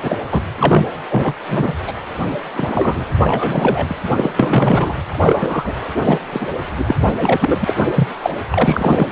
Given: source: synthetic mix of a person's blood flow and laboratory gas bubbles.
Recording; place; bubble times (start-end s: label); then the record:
Doppler ultrasound of blood flow; precordium
0.00-0.17 s: bubbles
0.32-0.40 s: bubbles
0.57-0.86 s: bubbles
1.09-1.33 s: bubbles
1.47-1.73 s: bubbles
1.87-1.92 s: bubbles
2.54-3.04 s: bubbles
3.21-4.11 s: bubbles
4.15-4.30 s: bubbles
4.36-4.94 s: bubbles
5.12-5.75 s: bubbles
5.99-6.19 s: bubbles
6.31-6.46 s: bubbles
6.78-6.96 s: bubbles
7.09-7.73 s: bubbles
7.76-7.84 s: bubbles
7.95-8.08 s: bubbles
8.22-8.30 s: bubbles
8.51-9.07 s: bubbles
From the record:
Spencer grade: 3 (all of the cardiac periods contain showers or single bubble signals, but not dominating or overriding the cardiac motion signals); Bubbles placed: anywhere in the cardiac cycle